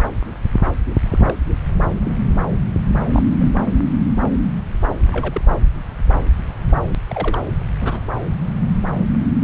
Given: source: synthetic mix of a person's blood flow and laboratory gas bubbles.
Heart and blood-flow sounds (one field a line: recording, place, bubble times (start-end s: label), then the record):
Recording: Doppler ultrasound of blood flow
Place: subclavian vein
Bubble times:
1.02-1.38 s: bubbles
2.04-2.12 s: bubbles
3.12-3.22 s: bubbles
3.38-3.51 s: bubbles
5.12-5.41 s: bubbles
7.10-7.39 s: bubbles
7.80-8.00 s: bubbles
From the record:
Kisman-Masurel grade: 122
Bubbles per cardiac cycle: 1 to 2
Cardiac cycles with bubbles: 10 to 50%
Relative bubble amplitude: moderate (0.250 to 0.450)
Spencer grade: 2 (many but less than half of the cardiac periods contain bubble signals, singularly or in groups)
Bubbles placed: anywhere in the cardiac cycle